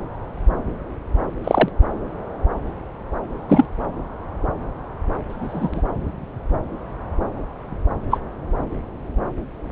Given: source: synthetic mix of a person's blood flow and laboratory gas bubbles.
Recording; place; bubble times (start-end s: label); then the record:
Doppler ultrasound of blood flow; subclavian vein
1.44-1.69 s: bubbles
3.48-3.66 s: bubbles
5.29-5.83 s: bubbles
8.11-8.20 s: bubbles
From the record:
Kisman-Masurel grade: 123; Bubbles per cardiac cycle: 1 to 2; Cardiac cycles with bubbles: 10 to 50%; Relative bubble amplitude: loud (0.450 to 0.775); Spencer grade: 2 (many but less than half of the cardiac periods contain bubble signals, singularly or in groups); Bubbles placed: anywhere in the cardiac cycle